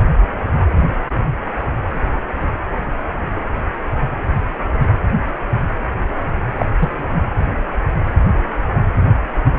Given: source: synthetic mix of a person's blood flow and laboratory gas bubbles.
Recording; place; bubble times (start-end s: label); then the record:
Doppler ultrasound of blood flow; precordium
6.56-6.66 s: bubbles
6.79-6.89 s: bubbles
From the record:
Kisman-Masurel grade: 113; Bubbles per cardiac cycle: 1 to 2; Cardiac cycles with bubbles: 1 to 10%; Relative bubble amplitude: loud (0.450 to 0.775); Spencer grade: 1 (occasional bubble signal discernible with the cardiac motion signal, with majority of cardiac periods free of bubbles); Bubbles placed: anywhere in the cardiac cycle